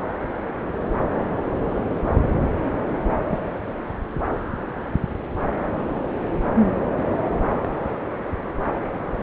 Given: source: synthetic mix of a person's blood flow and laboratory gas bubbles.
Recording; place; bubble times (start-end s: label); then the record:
Doppler ultrasound of blood flow; subclavian vein
3.31-3.42 s: bubbles
From the record:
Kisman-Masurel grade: 122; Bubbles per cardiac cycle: 1 to 2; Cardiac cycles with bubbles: 10 to 50%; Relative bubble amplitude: moderate (0.250 to 0.450); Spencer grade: 2 (many but less than half of the cardiac periods contain bubble signals, singularly or in groups); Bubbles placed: anywhere in the cardiac cycle